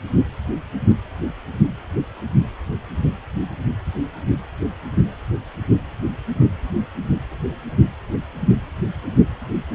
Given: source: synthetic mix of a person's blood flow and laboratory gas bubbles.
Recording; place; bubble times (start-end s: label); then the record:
Doppler ultrasound of blood flow; precordium
no bubbles
From the record:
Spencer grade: 0 (complete lack of bubble signals)